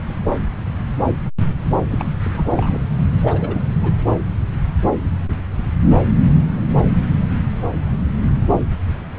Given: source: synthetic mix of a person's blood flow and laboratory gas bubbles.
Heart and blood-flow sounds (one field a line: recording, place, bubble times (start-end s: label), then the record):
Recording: Doppler ultrasound of blood flow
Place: subclavian vein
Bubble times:
1.90-2.10 s: bubbles
2.21-2.80 s: bubbles
3.22-3.66 s: bubbles
3.83-3.92 s: bubbles
From the record:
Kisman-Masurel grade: 221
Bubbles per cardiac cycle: several, 3 to 8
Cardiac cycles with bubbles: 10 to 50%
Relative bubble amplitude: barely perceptible (0.100 to 0.250)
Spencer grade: 2 (many but less than half of the cardiac periods contain bubble signals, singularly or in groups)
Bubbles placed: anywhere in the cardiac cycle